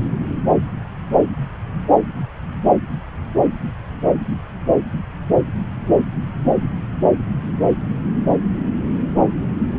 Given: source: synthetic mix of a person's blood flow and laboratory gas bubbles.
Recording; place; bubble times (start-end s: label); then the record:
Doppler ultrasound of blood flow; subclavian vein
no bubbles
From the record:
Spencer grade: 0 (complete lack of bubble signals)